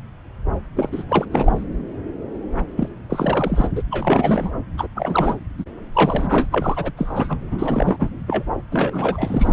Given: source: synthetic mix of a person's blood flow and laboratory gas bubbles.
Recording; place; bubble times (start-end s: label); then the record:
Doppler ultrasound of blood flow; subclavian vein
0.75-1.04 s: bubbles
1.08-1.25 s: bubbles
1.31-1.63 s: bubbles
2.76-2.89 s: bubbles
3.09-3.69 s: bubbles
3.75-3.83 s: bubbles
3.90-4.51 s: bubbles
4.77-4.87 s: bubbles
4.95-5.40 s: bubbles
5.58-5.64 s: bubbles
5.93-6.49 s: bubbles
6.51-6.92 s: bubbles
6.96-7.38 s: bubbles
7.51-8.10 s: bubbles
8.27-8.43 s: bubbles
8.71-9.53 s: bubbles
From the record:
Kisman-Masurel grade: 333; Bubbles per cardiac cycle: rolling drumbeat, 9 or more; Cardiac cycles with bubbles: 50 to 99%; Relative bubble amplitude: loud (0.450 to 0.775); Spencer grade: 3 (all of the cardiac periods contain showers or single bubble signals, but not dominating or overriding the cardiac motion signals); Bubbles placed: anywhere in the cardiac cycle